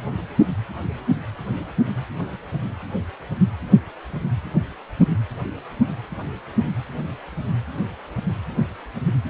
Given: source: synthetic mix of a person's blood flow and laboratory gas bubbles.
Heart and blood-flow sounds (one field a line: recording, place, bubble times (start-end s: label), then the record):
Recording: Doppler ultrasound of blood flow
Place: precordium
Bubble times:
no bubbles
From the record:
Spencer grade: 0 (complete lack of bubble signals)